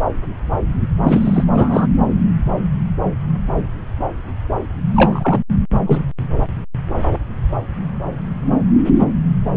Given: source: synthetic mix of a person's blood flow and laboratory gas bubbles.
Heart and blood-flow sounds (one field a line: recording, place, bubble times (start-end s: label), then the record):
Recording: Doppler ultrasound of blood flow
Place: subclavian vein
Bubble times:
1.04-1.46 s: bubbles
1.55-1.88 s: bubbles
4.96-5.40 s: bubbles
5.86-6.03 s: bubbles
From the record:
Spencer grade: 2 (many but less than half of the cardiac periods contain bubble signals, singularly or in groups)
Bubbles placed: anywhere in the cardiac cycle